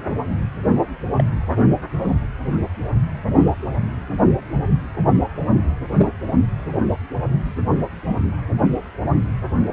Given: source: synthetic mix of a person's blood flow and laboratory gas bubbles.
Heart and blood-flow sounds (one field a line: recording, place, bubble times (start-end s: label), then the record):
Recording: Doppler ultrasound of blood flow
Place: precordium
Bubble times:
1.18-1.24 s: bubbles
5.98-6.10 s: bubbles
From the record:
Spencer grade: 2 (many but less than half of the cardiac periods contain bubble signals, singularly or in groups)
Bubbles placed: anywhere in the cardiac cycle